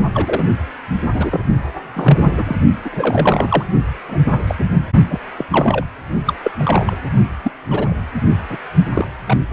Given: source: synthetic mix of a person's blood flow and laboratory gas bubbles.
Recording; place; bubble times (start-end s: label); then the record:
Doppler ultrasound of blood flow; precordium
0.14-0.44 s: bubbles
1.14-1.40 s: bubbles
1.95-2.56 s: bubbles
2.85-3.65 s: bubbles
4.08-4.17 s: bubbles
4.25-4.44 s: bubbles
4.47-4.55 s: bubbles
4.58-4.75 s: bubbles
5.09-5.20 s: bubbles
5.38-5.45 s: bubbles
5.50-5.85 s: bubbles
6.26-6.33 s: bubbles
6.43-6.51 s: bubbles
6.57-6.97 s: bubbles
7.43-7.51 s: bubbles
7.70-7.94 s: bubbles
8.49-8.59 s: bubbles
8.95-9.08 s: bubbles
9.27-9.38 s: bubbles
9.51-9.53 s: bubbles
From the record:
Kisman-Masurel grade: 242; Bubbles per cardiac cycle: several, 3 to 8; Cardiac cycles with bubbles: 100%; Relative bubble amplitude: moderate (0.250 to 0.450); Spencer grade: 3 (all of the cardiac periods contain showers or single bubble signals, but not dominating or overriding the cardiac motion signals); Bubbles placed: only in the low amplitude regions of the cardiac cycle